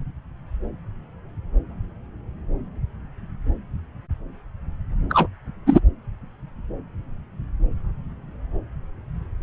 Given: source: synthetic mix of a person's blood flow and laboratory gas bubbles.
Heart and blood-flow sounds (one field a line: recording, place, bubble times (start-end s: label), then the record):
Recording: Doppler ultrasound of blood flow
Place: subclavian vein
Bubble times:
5.09-5.27 s: bubbles
5.66-5.80 s: bubbles
From the record:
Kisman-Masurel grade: 113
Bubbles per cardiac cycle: 1 to 2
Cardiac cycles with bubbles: 1 to 10%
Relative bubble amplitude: loud (0.450 to 0.775)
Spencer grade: 1 (occasional bubble signal discernible with the cardiac motion signal, with majority of cardiac periods free of bubbles)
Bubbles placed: anywhere in the cardiac cycle